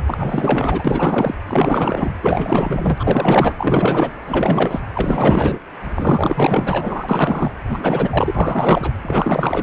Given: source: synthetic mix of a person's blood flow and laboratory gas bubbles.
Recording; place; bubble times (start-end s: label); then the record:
Doppler ultrasound of blood flow; precordium
0.06-1.34 s: bubbles
1.48-2.12 s: bubbles
2.22-3.54 s: bubbles
3.58-4.11 s: bubbles
4.26-4.79 s: bubbles
4.94-5.58 s: bubbles
5.94-7.51 s: bubbles
7.69-8.92 s: bubbles
9.02-9.63 s: bubbles
From the record:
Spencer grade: 4 (maximum detectable bubble signal sounding continuously throughout systole and diastole of every cardiac period, and overriding the amplitude of the normal cardiac signals); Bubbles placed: anywhere in the cardiac cycle